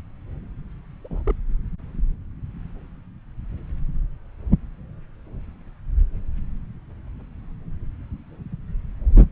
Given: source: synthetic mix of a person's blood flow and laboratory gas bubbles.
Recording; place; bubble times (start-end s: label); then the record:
Doppler ultrasound of blood flow; subclavian vein
1.04-1.22 s: bubbles
1.27-1.33 s: bubbles
From the record:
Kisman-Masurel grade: 211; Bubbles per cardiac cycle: several, 3 to 8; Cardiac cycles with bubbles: 1 to 10%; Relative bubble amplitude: barely perceptible (0.100 to 0.250); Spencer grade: 1 (occasional bubble signal discernible with the cardiac motion signal, with majority of cardiac periods free of bubbles); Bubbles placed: anywhere in the cardiac cycle